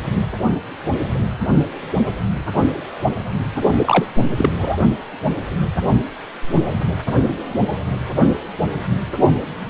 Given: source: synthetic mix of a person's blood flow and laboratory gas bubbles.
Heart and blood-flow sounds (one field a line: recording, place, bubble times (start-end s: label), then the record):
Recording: Doppler ultrasound of blood flow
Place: precordium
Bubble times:
3.85-4.06 s: bubbles
4.38-4.53 s: bubbles
4.58-4.78 s: bubbles
From the record:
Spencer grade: 1 (occasional bubble signal discernible with the cardiac motion signal, with majority of cardiac periods free of bubbles)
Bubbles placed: only in the low amplitude regions of the cardiac cycle